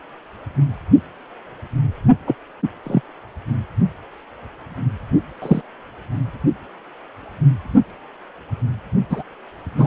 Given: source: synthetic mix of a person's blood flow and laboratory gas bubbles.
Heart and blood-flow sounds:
Doppler ultrasound of blood flow; precordium
2.27-2.35 s: bubbles
2.84-3.01 s: bubbles
5.42-5.62 s: bubbles
9.10-9.23 s: bubbles
9.78-9.87 s: bubbles
From the record:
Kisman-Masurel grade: 123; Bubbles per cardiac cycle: 1 to 2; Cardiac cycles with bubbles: 10 to 50%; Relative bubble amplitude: loud (0.450 to 0.775); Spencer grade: 2 (many but less than half of the cardiac periods contain bubble signals, singularly or in groups); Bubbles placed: only in the low amplitude regions of the cardiac cycle

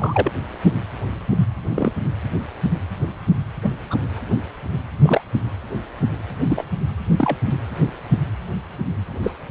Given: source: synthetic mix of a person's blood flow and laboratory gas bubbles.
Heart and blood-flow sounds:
Doppler ultrasound of blood flow; precordium
0.00-0.30 s: bubbles
1.69-1.93 s: bubbles
3.63-3.70 s: bubbles
3.90-3.98 s: bubbles
5.03-5.21 s: bubbles
6.43-6.64 s: bubbles
7.17-7.37 s: bubbles
9.22-9.31 s: bubbles
From the record:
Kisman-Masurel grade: 122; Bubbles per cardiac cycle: 1 to 2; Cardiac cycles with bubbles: 10 to 50%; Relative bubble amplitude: moderate (0.250 to 0.450); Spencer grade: 2 (many but less than half of the cardiac periods contain bubble signals, singularly or in groups); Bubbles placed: anywhere in the cardiac cycle

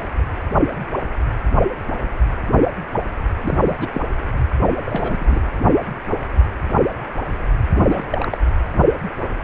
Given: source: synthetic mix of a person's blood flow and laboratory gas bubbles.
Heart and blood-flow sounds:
Doppler ultrasound of blood flow; precordium
3.42-3.58 s: bubbles
3.62-3.75 s: bubbles
3.80-3.87 s: bubbles
3.93-4.01 s: bubbles
4.60-4.71 s: bubbles
4.85-5.41 s: bubbles
7.75-8.06 s: bubbles
8.10-8.38 s: bubbles
From the record:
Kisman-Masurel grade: 222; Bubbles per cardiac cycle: several, 3 to 8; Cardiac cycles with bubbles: 10 to 50%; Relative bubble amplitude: moderate (0.250 to 0.450); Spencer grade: 2 (many but less than half of the cardiac periods contain bubble signals, singularly or in groups); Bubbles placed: anywhere in the cardiac cycle

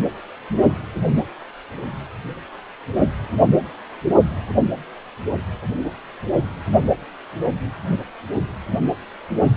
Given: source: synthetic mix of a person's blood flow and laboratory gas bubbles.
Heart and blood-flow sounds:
Doppler ultrasound of blood flow; precordium
no bubbles
From the record:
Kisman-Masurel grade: 000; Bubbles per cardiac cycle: 0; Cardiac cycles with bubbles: 0%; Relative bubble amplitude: no bubbles discernible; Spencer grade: 0 (complete lack of bubble signals)

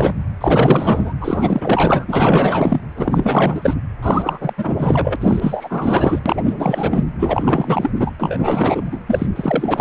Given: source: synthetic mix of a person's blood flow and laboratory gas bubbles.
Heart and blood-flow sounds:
Doppler ultrasound of blood flow; precordium
0.00-0.14 s: bubbles
0.40-1.14 s: bubbles
1.21-2.04 s: bubbles
2.08-2.81 s: bubbles
2.96-3.73 s: bubbles
4.02-4.53 s: bubbles
4.57-5.16 s: bubbles
5.21-6.19 s: bubbles
6.26-7.05 s: bubbles
7.19-7.91 s: bubbles
7.95-8.11 s: bubbles
8.20-9.01 s: bubbles
9.06-9.27 s: bubbles
9.36-9.81 s: bubbles
From the record:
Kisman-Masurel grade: 444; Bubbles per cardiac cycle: continuous sound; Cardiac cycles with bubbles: 100%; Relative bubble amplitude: maximal (0.775 to 0.999); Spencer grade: 4 (maximum detectable bubble signal sounding continuously throughout systole and diastole of every cardiac period, and overriding the amplitude of the normal cardiac signals); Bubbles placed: anywhere in the cardiac cycle

